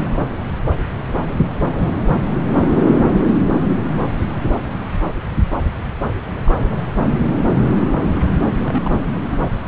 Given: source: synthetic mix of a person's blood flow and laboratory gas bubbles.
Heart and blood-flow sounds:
Doppler ultrasound of blood flow; subclavian vein
6.28-6.43 s: bubbles
6.46-6.52 s: bubbles
6.58-6.82 s: bubbles
6.96-7.06 s: bubbles
8.48-9.22 s: bubbles
9.31-9.38 s: bubbles
From the record:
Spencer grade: 2 (many but less than half of the cardiac periods contain bubble signals, singularly or in groups); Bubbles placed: anywhere in the cardiac cycle

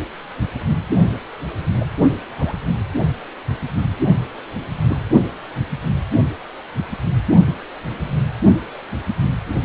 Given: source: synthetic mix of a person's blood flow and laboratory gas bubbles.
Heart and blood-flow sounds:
Doppler ultrasound of blood flow; precordium
1.80-1.86 s: bubbles
2.38-2.58 s: bubbles
4.88-5.02 s: bubbles
From the record:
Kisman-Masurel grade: 122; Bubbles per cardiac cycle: 1 to 2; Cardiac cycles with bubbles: 10 to 50%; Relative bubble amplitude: moderate (0.250 to 0.450); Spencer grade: 2 (many but less than half of the cardiac periods contain bubble signals, singularly or in groups); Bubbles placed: only in the low amplitude regions of the cardiac cycle

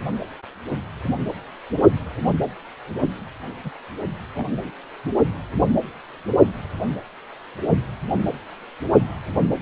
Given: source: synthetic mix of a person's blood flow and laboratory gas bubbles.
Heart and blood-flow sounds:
Doppler ultrasound of blood flow; precordium
3.64-3.70 s: bubbles
4.35-4.46 s: bubbles
4.62-4.70 s: bubbles
From the record:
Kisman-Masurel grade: 211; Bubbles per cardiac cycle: several, 3 to 8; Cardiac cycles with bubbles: 1 to 10%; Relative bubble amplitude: barely perceptible (0.100 to 0.250); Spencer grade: 1 (occasional bubble signal discernible with the cardiac motion signal, with majority of cardiac periods free of bubbles); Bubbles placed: only in the low amplitude regions of the cardiac cycle

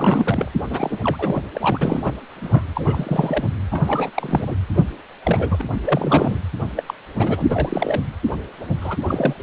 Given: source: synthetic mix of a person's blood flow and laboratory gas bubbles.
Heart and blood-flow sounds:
Doppler ultrasound of blood flow; precordium
0.00-0.52 s: bubbles
0.69-0.98 s: bubbles
1.02-1.42 s: bubbles
1.53-2.00 s: bubbles
2.04-2.12 s: bubbles
2.36-2.67 s: bubbles
2.75-3.49 s: bubbles
3.71-4.11 s: bubbles
4.16-4.55 s: bubbles
4.74-4.84 s: bubbles
5.25-5.62 s: bubbles
5.84-6.41 s: bubbles
6.76-6.83 s: bubbles
6.88-6.94 s: bubbles
7.19-8.01 s: bubbles
8.81-8.97 s: bubbles
9.08-9.34 s: bubbles
From the record:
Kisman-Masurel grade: 342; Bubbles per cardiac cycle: rolling drumbeat, 9 or more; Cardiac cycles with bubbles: 100%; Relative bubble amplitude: moderate (0.250 to 0.450); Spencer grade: 3 (all of the cardiac periods contain showers or single bubble signals, but not dominating or overriding the cardiac motion signals); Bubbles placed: anywhere in the cardiac cycle

